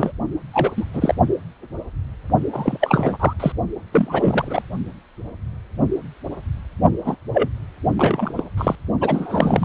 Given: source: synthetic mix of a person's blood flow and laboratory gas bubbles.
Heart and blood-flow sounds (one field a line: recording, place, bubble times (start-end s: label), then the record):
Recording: Doppler ultrasound of blood flow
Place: precordium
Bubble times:
0.00-0.12 s: bubbles
0.51-0.84 s: bubbles
0.94-1.15 s: bubbles
2.52-2.77 s: bubbles
2.80-3.17 s: bubbles
3.19-3.33 s: bubbles
3.40-3.52 s: bubbles
3.92-4.62 s: bubbles
7.04-7.17 s: bubbles
7.33-7.49 s: bubbles
7.97-8.33 s: bubbles
8.37-8.43 s: bubbles
8.57-8.76 s: bubbles
9.01-9.65 s: bubbles
From the record:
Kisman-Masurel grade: 233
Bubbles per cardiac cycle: several, 3 to 8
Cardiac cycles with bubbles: 50 to 99%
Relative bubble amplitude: loud (0.450 to 0.775)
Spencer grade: 3 (all of the cardiac periods contain showers or single bubble signals, but not dominating or overriding the cardiac motion signals)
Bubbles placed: only in the low amplitude regions of the cardiac cycle